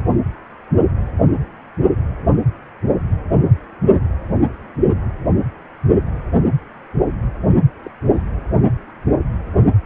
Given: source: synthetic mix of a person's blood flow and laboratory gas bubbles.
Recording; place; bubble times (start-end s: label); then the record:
Doppler ultrasound of blood flow; precordium
7.86-7.91 s: bubbles
8.14-8.22 s: bubbles
From the record:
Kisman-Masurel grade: 111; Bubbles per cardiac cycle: 1 to 2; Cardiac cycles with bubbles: 1 to 10%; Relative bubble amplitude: barely perceptible (0.100 to 0.250); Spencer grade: 1 (occasional bubble signal discernible with the cardiac motion signal, with majority of cardiac periods free of bubbles); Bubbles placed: anywhere in the cardiac cycle